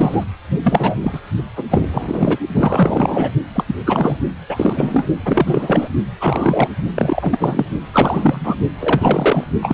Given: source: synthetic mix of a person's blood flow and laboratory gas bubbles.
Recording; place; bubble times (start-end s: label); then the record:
Doppler ultrasound of blood flow; precordium
0.00-0.24 s: bubbles
0.63-0.96 s: bubbles
1.01-1.20 s: bubbles
1.56-1.62 s: bubbles
1.70-2.39 s: bubbles
2.55-3.31 s: bubbles
3.54-3.64 s: bubbles
3.67-3.75 s: bubbles
3.85-4.17 s: bubbles
4.48-5.06 s: bubbles
5.25-5.88 s: bubbles
6.20-6.68 s: bubbles
6.94-7.66 s: bubbles
7.93-8.56 s: bubbles
8.80-9.44 s: bubbles
9.62-9.74 s: bubbles
From the record:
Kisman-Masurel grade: 343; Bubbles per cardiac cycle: rolling drumbeat, 9 or more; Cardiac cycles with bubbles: 100%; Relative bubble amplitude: loud (0.450 to 0.775); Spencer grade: 3 (all of the cardiac periods contain showers or single bubble signals, but not dominating or overriding the cardiac motion signals); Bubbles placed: only in the low amplitude regions of the cardiac cycle